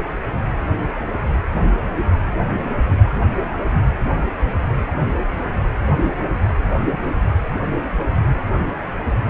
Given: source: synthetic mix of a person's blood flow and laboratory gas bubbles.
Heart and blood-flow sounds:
Doppler ultrasound of blood flow; precordium
no bubbles
From the record:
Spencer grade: 0 (complete lack of bubble signals)

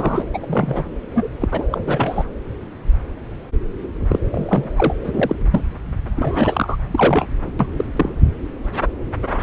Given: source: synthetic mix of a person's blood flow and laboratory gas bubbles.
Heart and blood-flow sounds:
Doppler ultrasound of blood flow; subclavian vein
0.00-0.24 s: bubbles
0.33-0.90 s: bubbles
1.15-1.28 s: bubbles
1.41-1.48 s: bubbles
1.51-1.64 s: bubbles
1.71-2.23 s: bubbles
4.09-4.19 s: bubbles
4.31-4.71 s: bubbles
4.76-4.93 s: bubbles
5.04-5.35 s: bubbles
5.50-5.63 s: bubbles
6.16-6.76 s: bubbles
6.91-7.51 s: bubbles
7.59-7.67 s: bubbles
7.76-7.84 s: bubbles
7.96-8.09 s: bubbles
From the record:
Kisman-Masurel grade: 232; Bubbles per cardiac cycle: several, 3 to 8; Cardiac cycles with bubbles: 50 to 99%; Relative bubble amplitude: moderate (0.250 to 0.450); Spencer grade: 3 (all of the cardiac periods contain showers or single bubble signals, but not dominating or overriding the cardiac motion signals); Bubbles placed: anywhere in the cardiac cycle

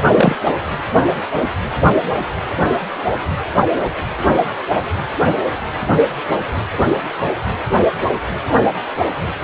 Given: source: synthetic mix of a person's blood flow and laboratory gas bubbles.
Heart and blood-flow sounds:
Doppler ultrasound of blood flow; precordium
0.16-0.35 s: bubbles
From the record:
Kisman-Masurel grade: 113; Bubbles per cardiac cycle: 1 to 2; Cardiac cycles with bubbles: 1 to 10%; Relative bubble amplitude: loud (0.450 to 0.775); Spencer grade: 1 (occasional bubble signal discernible with the cardiac motion signal, with majority of cardiac periods free of bubbles); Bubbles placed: anywhere in the cardiac cycle

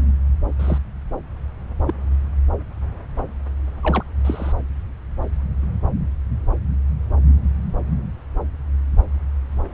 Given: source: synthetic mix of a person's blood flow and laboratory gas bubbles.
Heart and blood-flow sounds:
Doppler ultrasound of blood flow; subclavian vein
0.59-0.78 s: bubbles
1.86-1.93 s: bubbles
3.83-4.03 s: bubbles
4.25-4.53 s: bubbles
From the record:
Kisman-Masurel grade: 122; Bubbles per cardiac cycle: 1 to 2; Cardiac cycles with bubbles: 10 to 50%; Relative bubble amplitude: moderate (0.250 to 0.450); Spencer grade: 2 (many but less than half of the cardiac periods contain bubble signals, singularly or in groups); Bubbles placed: anywhere in the cardiac cycle

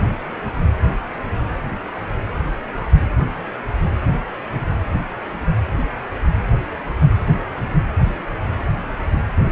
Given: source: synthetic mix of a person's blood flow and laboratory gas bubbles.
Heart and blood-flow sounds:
Doppler ultrasound of blood flow; precordium
no bubbles
From the record:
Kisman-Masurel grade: 000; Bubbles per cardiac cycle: 0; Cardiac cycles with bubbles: 0%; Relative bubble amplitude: no bubbles discernible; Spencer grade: 0 (complete lack of bubble signals)

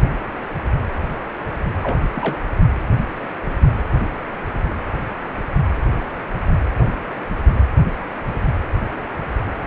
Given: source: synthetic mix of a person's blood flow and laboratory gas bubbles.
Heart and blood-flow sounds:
Doppler ultrasound of blood flow; precordium
1.83-1.98 s: bubbles
2.14-2.38 s: bubbles
From the record:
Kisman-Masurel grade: 211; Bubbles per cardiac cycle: several, 3 to 8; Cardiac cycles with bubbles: 1 to 10%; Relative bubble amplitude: barely perceptible (0.100 to 0.250); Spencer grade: 1 (occasional bubble signal discernible with the cardiac motion signal, with majority of cardiac periods free of bubbles); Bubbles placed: anywhere in the cardiac cycle

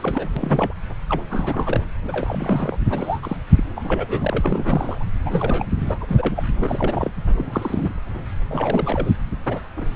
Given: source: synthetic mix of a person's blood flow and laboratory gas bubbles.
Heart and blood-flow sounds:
Doppler ultrasound of blood flow; subclavian vein
0.00-0.30 s: bubbles
0.36-0.73 s: bubbles
1.09-1.22 s: bubbles
1.30-1.86 s: bubbles
2.08-2.77 s: bubbles
2.90-3.20 s: bubbles
3.22-3.37 s: bubbles
3.52-3.64 s: bubbles
3.77-5.04 s: bubbles
5.25-5.66 s: bubbles
5.87-5.98 s: bubbles
6.00-6.43 s: bubbles
6.60-7.10 s: bubbles
7.17-7.22 s: bubbles
7.36-7.91 s: bubbles
8.48-9.11 s: bubbles
9.46-9.61 s: bubbles
9.77-9.87 s: bubbles
From the record:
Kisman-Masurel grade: 342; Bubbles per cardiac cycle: rolling drumbeat, 9 or more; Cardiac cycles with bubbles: 100%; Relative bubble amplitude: moderate (0.250 to 0.450); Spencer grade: 3 (all of the cardiac periods contain showers or single bubble signals, but not dominating or overriding the cardiac motion signals); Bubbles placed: anywhere in the cardiac cycle

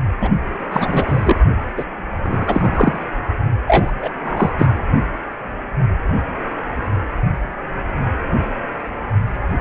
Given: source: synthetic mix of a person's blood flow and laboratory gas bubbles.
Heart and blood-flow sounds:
Doppler ultrasound of blood flow; precordium
0.20-0.29 s: bubbles
0.71-1.40 s: bubbles
1.77-1.84 s: bubbles
2.23-2.99 s: bubbles
3.68-3.92 s: bubbles
4.00-4.09 s: bubbles
4.23-4.52 s: bubbles
4.58-4.66 s: bubbles
From the record:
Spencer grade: 3 (all of the cardiac periods contain showers or single bubble signals, but not dominating or overriding the cardiac motion signals); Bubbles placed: only in the low amplitude regions of the cardiac cycle

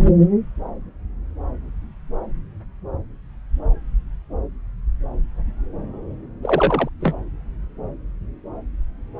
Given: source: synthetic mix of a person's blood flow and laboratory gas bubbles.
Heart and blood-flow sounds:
Doppler ultrasound of blood flow; subclavian vein
6.42-6.89 s: bubbles
7.01-7.15 s: bubbles
From the record:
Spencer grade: 1 (occasional bubble signal discernible with the cardiac motion signal, with majority of cardiac periods free of bubbles); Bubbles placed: anywhere in the cardiac cycle

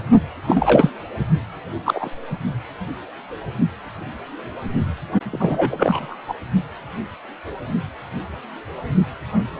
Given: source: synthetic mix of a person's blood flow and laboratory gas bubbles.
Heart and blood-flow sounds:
Doppler ultrasound of blood flow; precordium
0.48-0.90 s: bubbles
1.84-2.09 s: bubbles
5.32-6.16 s: bubbles
6.28-6.35 s: bubbles
From the record:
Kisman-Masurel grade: 223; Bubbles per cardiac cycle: several, 3 to 8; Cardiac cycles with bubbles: 10 to 50%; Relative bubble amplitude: loud (0.450 to 0.775); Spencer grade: 2 (many but less than half of the cardiac periods contain bubble signals, singularly or in groups); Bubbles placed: only in the low amplitude regions of the cardiac cycle

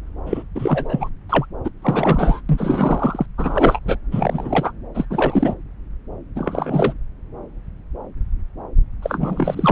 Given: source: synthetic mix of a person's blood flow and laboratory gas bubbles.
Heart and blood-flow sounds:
Doppler ultrasound of blood flow; subclavian vein
0.26-0.43 s: bubbles
0.54-1.09 s: bubbles
1.29-1.46 s: bubbles
1.64-1.70 s: bubbles
1.82-2.41 s: bubbles
2.49-3.26 s: bubbles
3.38-3.79 s: bubbles
3.85-3.97 s: bubbles
4.11-4.72 s: bubbles
4.94-5.05 s: bubbles
5.10-5.54 s: bubbles
6.35-6.94 s: bubbles
9.02-9.71 s: bubbles
From the record:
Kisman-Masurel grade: 333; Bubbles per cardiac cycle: rolling drumbeat, 9 or more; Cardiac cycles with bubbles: 50 to 99%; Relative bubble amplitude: loud (0.450 to 0.775); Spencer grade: 3 (all of the cardiac periods contain showers or single bubble signals, but not dominating or overriding the cardiac motion signals); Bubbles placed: anywhere in the cardiac cycle

